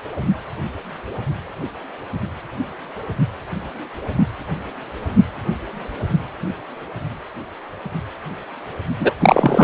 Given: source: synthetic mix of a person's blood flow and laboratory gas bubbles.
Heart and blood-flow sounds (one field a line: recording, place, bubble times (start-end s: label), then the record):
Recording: Doppler ultrasound of blood flow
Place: precordium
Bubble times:
8.99-9.13 s: bubbles
9.21-9.64 s: bubbles
From the record:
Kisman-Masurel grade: 223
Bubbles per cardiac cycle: several, 3 to 8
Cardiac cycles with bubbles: 10 to 50%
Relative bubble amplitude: loud (0.450 to 0.775)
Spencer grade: 2 (many but less than half of the cardiac periods contain bubble signals, singularly or in groups)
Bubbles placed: only in the low amplitude regions of the cardiac cycle